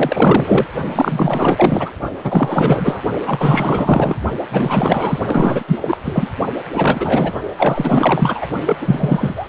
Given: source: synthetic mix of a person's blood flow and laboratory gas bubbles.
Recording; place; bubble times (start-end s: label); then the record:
Doppler ultrasound of blood flow; precordium
0.00-0.66 s: bubbles
0.94-1.92 s: bubbles
2.24-3.02 s: bubbles
3.26-4.16 s: bubbles
4.52-5.20 s: bubbles
5.26-5.63 s: bubbles
5.67-5.98 s: bubbles
6.04-6.29 s: bubbles
6.74-7.33 s: bubbles
7.58-8.47 s: bubbles
8.66-8.78 s: bubbles
8.81-9.49 s: bubbles
From the record:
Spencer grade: 4 (maximum detectable bubble signal sounding continuously throughout systole and diastole of every cardiac period, and overriding the amplitude of the normal cardiac signals); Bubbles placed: only in the low amplitude regions of the cardiac cycle